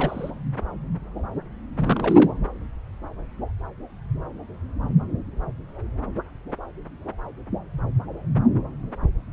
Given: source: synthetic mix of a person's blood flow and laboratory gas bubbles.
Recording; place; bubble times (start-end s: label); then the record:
Doppler ultrasound of blood flow; subclavian vein
0.00-0.30 s: bubbles
1.77-2.31 s: bubbles
From the record:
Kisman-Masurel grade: 212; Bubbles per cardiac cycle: several, 3 to 8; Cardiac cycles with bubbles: 1 to 10%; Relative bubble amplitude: moderate (0.250 to 0.450); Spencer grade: 1 (occasional bubble signal discernible with the cardiac motion signal, with majority of cardiac periods free of bubbles); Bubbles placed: anywhere in the cardiac cycle